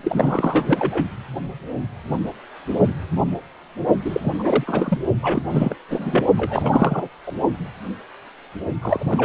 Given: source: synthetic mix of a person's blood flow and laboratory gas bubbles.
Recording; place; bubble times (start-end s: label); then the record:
Doppler ultrasound of blood flow; precordium
0.00-1.07 s: bubbles
4.05-4.34 s: bubbles
4.39-4.98 s: bubbles
5.22-5.42 s: bubbles
5.50-5.76 s: bubbles
5.89-6.25 s: bubbles
6.37-7.08 s: bubbles
7.27-7.32 s: bubbles
8.81-9.25 s: bubbles
From the record:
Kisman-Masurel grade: 333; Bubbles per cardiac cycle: rolling drumbeat, 9 or more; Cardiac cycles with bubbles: 50 to 99%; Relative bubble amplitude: loud (0.450 to 0.775); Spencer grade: 3 (all of the cardiac periods contain showers or single bubble signals, but not dominating or overriding the cardiac motion signals); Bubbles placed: only in the low amplitude regions of the cardiac cycle